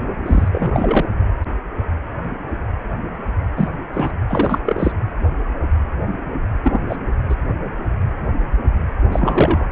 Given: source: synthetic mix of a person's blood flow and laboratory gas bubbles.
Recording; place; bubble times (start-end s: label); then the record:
Doppler ultrasound of blood flow; precordium
0.24-0.48 s: bubbles
0.52-1.05 s: bubbles
3.56-3.68 s: bubbles
3.93-4.12 s: bubbles
4.28-4.58 s: bubbles
4.65-4.92 s: bubbles
6.63-6.80 s: bubbles
6.89-6.96 s: bubbles
7.29-7.35 s: bubbles
9.12-9.68 s: bubbles
From the record:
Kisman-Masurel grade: 223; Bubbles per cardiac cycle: several, 3 to 8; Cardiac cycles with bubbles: 10 to 50%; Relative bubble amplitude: loud (0.450 to 0.775); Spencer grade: 2 (many but less than half of the cardiac periods contain bubble signals, singularly or in groups); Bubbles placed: anywhere in the cardiac cycle